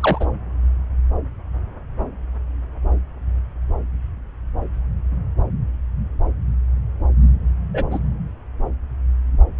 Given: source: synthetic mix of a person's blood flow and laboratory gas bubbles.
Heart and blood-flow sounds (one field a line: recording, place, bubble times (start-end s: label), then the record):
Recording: Doppler ultrasound of blood flow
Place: subclavian vein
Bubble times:
0.00-0.26 s: bubbles
7.74-7.84 s: bubbles
7.90-7.99 s: bubbles
From the record:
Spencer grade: 2 (many but less than half of the cardiac periods contain bubble signals, singularly or in groups)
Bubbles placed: anywhere in the cardiac cycle